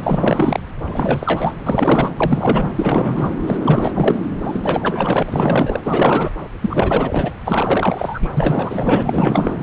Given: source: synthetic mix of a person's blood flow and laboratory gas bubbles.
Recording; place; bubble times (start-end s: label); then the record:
Doppler ultrasound of blood flow; subclavian vein
0.00-0.60 s: bubbles
0.83-1.53 s: bubbles
1.66-2.11 s: bubbles
2.20-2.70 s: bubbles
2.75-3.29 s: bubbles
3.46-3.57 s: bubbles
3.65-4.26 s: bubbles
4.44-5.23 s: bubbles
5.25-5.80 s: bubbles
5.84-6.30 s: bubbles
6.61-7.37 s: bubbles
7.45-8.29 s: bubbles
8.37-9.52 s: bubbles
From the record:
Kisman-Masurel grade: 444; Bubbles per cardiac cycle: continuous sound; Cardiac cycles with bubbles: 100%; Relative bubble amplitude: maximal (0.775 to 0.999); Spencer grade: 4 (maximum detectable bubble signal sounding continuously throughout systole and diastole of every cardiac period, and overriding the amplitude of the normal cardiac signals); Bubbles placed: anywhere in the cardiac cycle